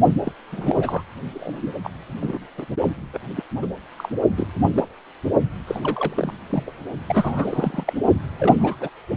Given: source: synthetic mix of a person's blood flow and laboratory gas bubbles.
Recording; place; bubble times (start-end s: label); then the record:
Doppler ultrasound of blood flow; precordium
0.24-0.32 s: bubbles
0.52-1.04 s: bubbles
1.33-1.79 s: bubbles
1.84-1.90 s: bubbles
2.20-2.38 s: bubbles
2.58-2.65 s: bubbles
3.13-3.19 s: bubbles
3.36-3.44 s: bubbles
3.61-3.67 s: bubbles
3.97-4.09 s: bubbles
4.37-4.48 s: bubbles
4.60-4.71 s: bubbles
4.74-4.88 s: bubbles
5.67-5.80 s: bubbles
5.83-6.33 s: bubbles
6.50-6.63 s: bubbles
6.66-6.71 s: bubbles
7.07-7.84 s: bubbles
7.86-7.93 s: bubbles
8.39-8.76 s: bubbles
8.80-8.89 s: bubbles
From the record:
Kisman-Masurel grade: 242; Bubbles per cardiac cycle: several, 3 to 8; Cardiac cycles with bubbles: 100%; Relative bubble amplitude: moderate (0.250 to 0.450); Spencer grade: 3 (all of the cardiac periods contain showers or single bubble signals, but not dominating or overriding the cardiac motion signals); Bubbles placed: only in the low amplitude regions of the cardiac cycle